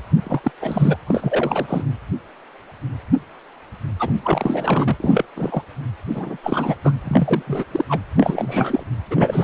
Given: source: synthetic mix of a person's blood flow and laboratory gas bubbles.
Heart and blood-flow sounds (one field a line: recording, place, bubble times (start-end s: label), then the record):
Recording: Doppler ultrasound of blood flow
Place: precordium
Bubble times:
0.23-0.41 s: bubbles
0.44-0.51 s: bubbles
0.60-0.96 s: bubbles
1.06-1.83 s: bubbles
3.99-4.12 s: bubbles
4.24-4.97 s: bubbles
5.00-5.25 s: bubbles
5.36-5.63 s: bubbles
6.08-6.38 s: bubbles
6.43-6.75 s: bubbles
6.83-6.92 s: bubbles
7.04-7.42 s: bubbles
7.47-7.64 s: bubbles
7.71-7.84 s: bubbles
7.89-7.98 s: bubbles
8.17-8.83 s: bubbles
9.10-9.44 s: bubbles
From the record:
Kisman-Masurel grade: 332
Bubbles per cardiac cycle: rolling drumbeat, 9 or more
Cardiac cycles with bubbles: 50 to 99%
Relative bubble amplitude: moderate (0.250 to 0.450)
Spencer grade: 3 (all of the cardiac periods contain showers or single bubble signals, but not dominating or overriding the cardiac motion signals)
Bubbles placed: anywhere in the cardiac cycle